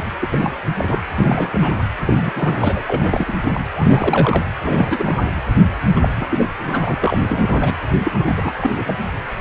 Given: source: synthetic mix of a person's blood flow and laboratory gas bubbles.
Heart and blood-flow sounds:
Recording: Doppler ultrasound of blood flow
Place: precordium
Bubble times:
0.00-0.04 s: bubbles
0.22-0.27 s: bubbles
0.30-0.55 s: bubbles
0.76-1.01 s: bubbles
1.15-1.83 s: bubbles
2.06-2.83 s: bubbles
2.87-3.33 s: bubbles
3.44-3.60 s: bubbles
3.75-4.44 s: bubbles
4.64-5.17 s: bubbles
5.20-5.40 s: bubbles
5.96-6.08 s: bubbles
6.16-6.46 s: bubbles
6.66-6.96 s: bubbles
7.00-7.75 s: bubbles
8.04-8.52 s: bubbles
8.61-8.83 s: bubbles
8.86-8.95 s: bubbles
From the record:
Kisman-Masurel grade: 342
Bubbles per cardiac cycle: rolling drumbeat, 9 or more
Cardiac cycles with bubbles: 100%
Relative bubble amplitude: moderate (0.250 to 0.450)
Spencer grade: 3 (all of the cardiac periods contain showers or single bubble signals, but not dominating or overriding the cardiac motion signals)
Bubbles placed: anywhere in the cardiac cycle

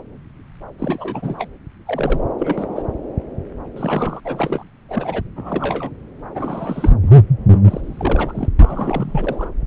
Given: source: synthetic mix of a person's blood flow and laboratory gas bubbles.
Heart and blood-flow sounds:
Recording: Doppler ultrasound of blood flow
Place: subclavian vein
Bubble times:
0.78-1.48 s: bubbles
1.85-2.21 s: bubbles
2.38-2.83 s: bubbles
3.76-4.21 s: bubbles
4.24-4.63 s: bubbles
4.88-5.22 s: bubbles
5.36-5.91 s: bubbles
6.20-6.22 s: bubbles
6.35-6.90 s: bubbles
7.02-7.22 s: bubbles
7.52-7.59 s: bubbles
7.64-8.49 s: bubbles
8.59-9.49 s: bubbles
From the record:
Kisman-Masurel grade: 332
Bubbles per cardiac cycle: rolling drumbeat, 9 or more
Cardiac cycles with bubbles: 50 to 99%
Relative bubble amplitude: moderate (0.250 to 0.450)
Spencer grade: 3 (all of the cardiac periods contain showers or single bubble signals, but not dominating or overriding the cardiac motion signals)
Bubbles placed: anywhere in the cardiac cycle

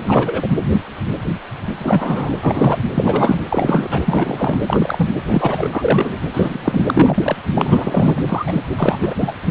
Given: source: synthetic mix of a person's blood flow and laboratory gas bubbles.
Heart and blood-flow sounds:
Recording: Doppler ultrasound of blood flow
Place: precordium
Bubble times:
0.02-0.47 s: bubbles
1.78-2.36 s: bubbles
2.40-2.85 s: bubbles
2.95-3.41 s: bubbles
3.50-4.59 s: bubbles
4.67-5.14 s: bubbles
5.28-5.68 s: bubbles
5.71-6.16 s: bubbles
6.33-6.85 s: bubbles
6.88-7.37 s: bubbles
7.53-8.22 s: bubbles
8.29-8.62 s: bubbles
8.77-8.98 s: bubbles
9.02-9.14 s: bubbles
9.17-9.33 s: bubbles
9.46-9.51 s: bubbles
From the record:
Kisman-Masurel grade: 233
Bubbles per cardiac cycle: several, 3 to 8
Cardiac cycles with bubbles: 50 to 99%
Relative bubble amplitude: loud (0.450 to 0.775)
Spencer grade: 3 (all of the cardiac periods contain showers or single bubble signals, but not dominating or overriding the cardiac motion signals)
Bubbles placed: anywhere in the cardiac cycle

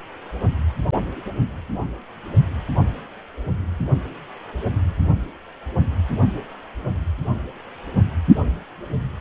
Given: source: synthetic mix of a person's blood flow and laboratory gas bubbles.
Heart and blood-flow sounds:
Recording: Doppler ultrasound of blood flow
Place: precordium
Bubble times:
no bubbles
From the record:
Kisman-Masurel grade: 000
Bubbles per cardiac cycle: 0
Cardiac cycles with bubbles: 0%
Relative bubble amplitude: no bubbles discernible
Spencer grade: 0 (complete lack of bubble signals)

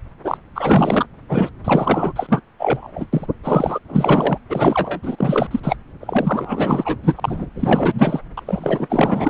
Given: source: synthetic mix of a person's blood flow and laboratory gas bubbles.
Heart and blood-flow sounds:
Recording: Doppler ultrasound of blood flow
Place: subclavian vein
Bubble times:
0.24-0.38 s: bubbles
0.54-1.06 s: bubbles
1.29-1.51 s: bubbles
1.64-2.12 s: bubbles
2.16-2.41 s: bubbles
2.59-3.06 s: bubbles
3.12-3.26 s: bubbles
3.44-3.79 s: bubbles
3.89-4.38 s: bubbles
4.49-5.00 s: bubbles
5.03-5.47 s: bubbles
5.50-5.60 s: bubbles
5.63-5.76 s: bubbles
6.00-6.97 s: bubbles
7.03-7.47 s: bubbles
7.54-8.20 s: bubbles
8.37-8.42 s: bubbles
8.46-9.30 s: bubbles
From the record:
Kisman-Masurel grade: 444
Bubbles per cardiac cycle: continuous sound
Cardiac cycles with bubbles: 100%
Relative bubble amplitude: maximal (0.775 to 0.999)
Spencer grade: 4 (maximum detectable bubble signal sounding continuously throughout systole and diastole of every cardiac period, and overriding the amplitude of the normal cardiac signals)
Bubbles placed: anywhere in the cardiac cycle

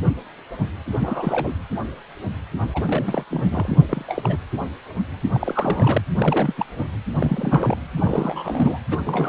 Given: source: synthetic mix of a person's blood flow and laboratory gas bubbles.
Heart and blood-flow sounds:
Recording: Doppler ultrasound of blood flow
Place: precordium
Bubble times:
0.92-1.54 s: bubbles
2.74-2.82 s: bubbles
2.87-3.24 s: bubbles
3.31-3.78 s: bubbles
3.89-4.38 s: bubbles
5.33-6.02 s: bubbles
6.17-6.54 s: bubbles
6.57-6.66 s: bubbles
6.75-6.83 s: bubbles
7.15-7.75 s: bubbles
7.96-8.79 s: bubbles
8.90-8.98 s: bubbles
9.05-9.29 s: bubbles
From the record:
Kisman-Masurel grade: 332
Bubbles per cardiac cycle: rolling drumbeat, 9 or more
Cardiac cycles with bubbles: 50 to 99%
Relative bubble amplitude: moderate (0.250 to 0.450)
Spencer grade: 3 (all of the cardiac periods contain showers or single bubble signals, but not dominating or overriding the cardiac motion signals)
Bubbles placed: anywhere in the cardiac cycle

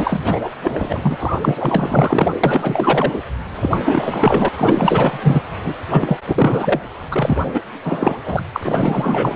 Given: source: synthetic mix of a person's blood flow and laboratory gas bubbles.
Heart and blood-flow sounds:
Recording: Doppler ultrasound of blood flow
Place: precordium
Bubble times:
0.00-0.42 s: bubbles
0.64-1.17 s: bubbles
1.20-1.37 s: bubbles
1.41-2.40 s: bubbles
2.44-3.19 s: bubbles
3.56-3.83 s: bubbles
3.86-4.49 s: bubbles
4.57-5.41 s: bubbles
5.62-5.75 s: bubbles
5.91-6.17 s: bubbles
6.27-6.80 s: bubbles
7.11-7.42 s: bubbles
7.54-7.62 s: bubbles
7.84-8.18 s: bubbles
8.25-8.45 s: bubbles
8.53-9.36 s: bubbles
From the record:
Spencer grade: 4 (maximum detectable bubble signal sounding continuously throughout systole and diastole of every cardiac period, and overriding the amplitude of the normal cardiac signals)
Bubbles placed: anywhere in the cardiac cycle

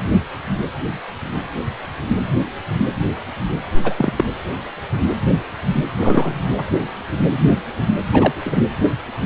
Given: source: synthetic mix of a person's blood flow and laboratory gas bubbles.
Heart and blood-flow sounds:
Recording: Doppler ultrasound of blood flow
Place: precordium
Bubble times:
3.83-3.93 s: bubbles
3.96-4.13 s: bubbles
4.17-4.25 s: bubbles
5.97-6.40 s: bubbles
6.56-6.68 s: bubbles
8.12-8.33 s: bubbles
8.44-8.63 s: bubbles
From the record:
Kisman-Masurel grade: 223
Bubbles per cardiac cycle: several, 3 to 8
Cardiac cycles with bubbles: 10 to 50%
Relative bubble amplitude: loud (0.450 to 0.775)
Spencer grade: 2 (many but less than half of the cardiac periods contain bubble signals, singularly or in groups)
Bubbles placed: anywhere in the cardiac cycle

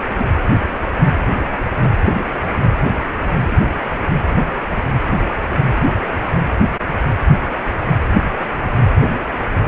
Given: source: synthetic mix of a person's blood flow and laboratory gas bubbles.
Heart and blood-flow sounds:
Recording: Doppler ultrasound of blood flow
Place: precordium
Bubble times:
0.17-0.26 s: bubbles
From the record:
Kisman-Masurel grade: 112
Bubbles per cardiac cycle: 1 to 2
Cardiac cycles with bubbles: 1 to 10%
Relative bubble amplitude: moderate (0.250 to 0.450)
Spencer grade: 1 (occasional bubble signal discernible with the cardiac motion signal, with majority of cardiac periods free of bubbles)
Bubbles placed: anywhere in the cardiac cycle

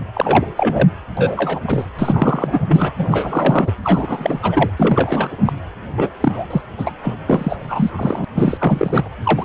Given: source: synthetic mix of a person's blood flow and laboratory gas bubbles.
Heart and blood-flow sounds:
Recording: Doppler ultrasound of blood flow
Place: precordium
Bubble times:
0.14-0.49 s: bubbles
0.57-0.89 s: bubbles
1.17-1.60 s: bubbles
1.67-1.86 s: bubbles
1.98-2.60 s: bubbles
2.66-2.93 s: bubbles
2.98-3.71 s: bubbles
3.83-4.70 s: bubbles
4.78-5.53 s: bubbles
5.96-6.09 s: bubbles
6.21-6.47 s: bubbles
6.50-6.62 s: bubbles
6.78-6.92 s: bubbles
7.04-7.15 s: bubbles
7.27-7.57 s: bubbles
7.59-8.25 s: bubbles
8.34-9.09 s: bubbles
9.23-9.45 s: bubbles
From the record:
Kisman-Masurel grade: 343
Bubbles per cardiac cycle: rolling drumbeat, 9 or more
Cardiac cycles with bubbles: 100%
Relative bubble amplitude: loud (0.450 to 0.775)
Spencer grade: 3 (all of the cardiac periods contain showers or single bubble signals, but not dominating or overriding the cardiac motion signals)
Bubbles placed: anywhere in the cardiac cycle

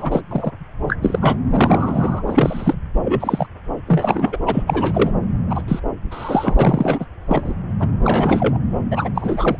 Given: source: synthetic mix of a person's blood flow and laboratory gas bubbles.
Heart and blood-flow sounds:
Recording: Doppler ultrasound of blood flow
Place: subclavian vein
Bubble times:
0.00-0.21 s: bubbles
0.30-0.52 s: bubbles
0.88-0.96 s: bubbles
1.02-1.36 s: bubbles
1.50-2.22 s: bubbles
2.27-2.75 s: bubbles
3.04-3.47 s: bubbles
3.87-4.38 s: bubbles
4.46-4.63 s: bubbles
4.67-5.11 s: bubbles
5.50-5.62 s: bubbles
5.68-5.79 s: bubbles
6.10-6.56 s: bubbles
6.59-7.05 s: bubbles
7.28-7.54 s: bubbles
7.79-7.88 s: bubbles
8.04-8.59 s: bubbles
8.91-9.09 s: bubbles
9.15-9.57 s: bubbles
From the record:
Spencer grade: 3 (all of the cardiac periods contain showers or single bubble signals, but not dominating or overriding the cardiac motion signals)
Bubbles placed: anywhere in the cardiac cycle

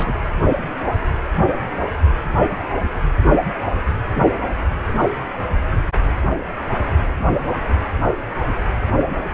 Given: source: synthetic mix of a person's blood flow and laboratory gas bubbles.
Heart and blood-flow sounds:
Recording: Doppler ultrasound of blood flow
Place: precordium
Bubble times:
0.00-0.17 s: bubbles
From the record:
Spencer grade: 1 (occasional bubble signal discernible with the cardiac motion signal, with majority of cardiac periods free of bubbles)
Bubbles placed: anywhere in the cardiac cycle

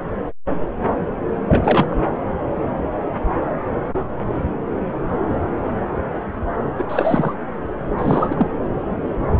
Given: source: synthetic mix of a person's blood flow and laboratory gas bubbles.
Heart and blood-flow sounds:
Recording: Doppler ultrasound of blood flow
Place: subclavian vein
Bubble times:
1.46-1.97 s: bubbles
6.78-6.84 s: bubbles
6.89-7.37 s: bubbles
7.98-8.47 s: bubbles
From the record:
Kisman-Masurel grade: 223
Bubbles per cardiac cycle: several, 3 to 8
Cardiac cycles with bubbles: 10 to 50%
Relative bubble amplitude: loud (0.450 to 0.775)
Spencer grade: 2 (many but less than half of the cardiac periods contain bubble signals, singularly or in groups)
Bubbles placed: anywhere in the cardiac cycle

